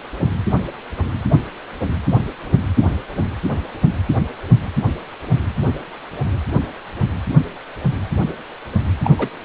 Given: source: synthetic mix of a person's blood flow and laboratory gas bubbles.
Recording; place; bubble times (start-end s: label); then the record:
Doppler ultrasound of blood flow; precordium
9.04-9.10 s: bubbles
9.18-9.29 s: bubbles
From the record:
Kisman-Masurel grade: 112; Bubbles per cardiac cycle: 1 to 2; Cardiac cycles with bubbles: 1 to 10%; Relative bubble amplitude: moderate (0.250 to 0.450); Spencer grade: 1 (occasional bubble signal discernible with the cardiac motion signal, with majority of cardiac periods free of bubbles); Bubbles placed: anywhere in the cardiac cycle